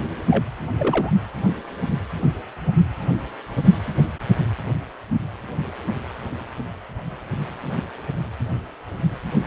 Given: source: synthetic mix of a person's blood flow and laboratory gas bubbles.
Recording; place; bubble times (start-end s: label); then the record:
Doppler ultrasound of blood flow; precordium
0.00-0.02 s: bubbles
0.30-0.43 s: bubbles
0.79-1.10 s: bubbles
From the record:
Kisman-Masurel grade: 212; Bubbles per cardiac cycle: several, 3 to 8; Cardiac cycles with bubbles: 1 to 10%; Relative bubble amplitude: moderate (0.250 to 0.450); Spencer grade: 1 (occasional bubble signal discernible with the cardiac motion signal, with majority of cardiac periods free of bubbles); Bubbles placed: anywhere in the cardiac cycle